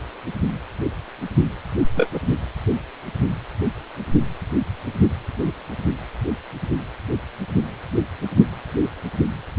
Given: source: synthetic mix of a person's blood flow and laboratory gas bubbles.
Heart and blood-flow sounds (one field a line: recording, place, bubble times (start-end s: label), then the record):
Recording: Doppler ultrasound of blood flow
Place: precordium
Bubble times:
1.95-2.09 s: bubbles
2.13-2.19 s: bubbles
From the record:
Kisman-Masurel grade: 113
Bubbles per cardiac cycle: 1 to 2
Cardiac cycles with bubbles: 1 to 10%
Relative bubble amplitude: loud (0.450 to 0.775)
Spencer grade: 1 (occasional bubble signal discernible with the cardiac motion signal, with majority of cardiac periods free of bubbles)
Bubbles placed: only in the low amplitude regions of the cardiac cycle